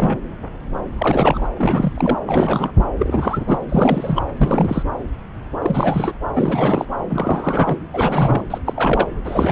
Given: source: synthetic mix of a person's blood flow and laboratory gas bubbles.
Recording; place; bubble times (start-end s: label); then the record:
Doppler ultrasound of blood flow; subclavian vein
0.00-0.17 s: bubbles
0.97-1.48 s: bubbles
1.56-2.19 s: bubbles
2.26-2.71 s: bubbles
2.79-2.84 s: bubbles
2.99-3.58 s: bubbles
3.69-4.22 s: bubbles
4.37-4.83 s: bubbles
5.62-6.13 s: bubbles
6.35-6.85 s: bubbles
7.10-7.77 s: bubbles
7.92-8.45 s: bubbles
8.50-8.58 s: bubbles
8.66-9.07 s: bubbles
9.25-9.52 s: bubbles
From the record:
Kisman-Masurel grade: 333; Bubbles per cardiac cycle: rolling drumbeat, 9 or more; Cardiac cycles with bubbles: 50 to 99%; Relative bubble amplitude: loud (0.450 to 0.775); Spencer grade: 3 (all of the cardiac periods contain showers or single bubble signals, but not dominating or overriding the cardiac motion signals); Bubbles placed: anywhere in the cardiac cycle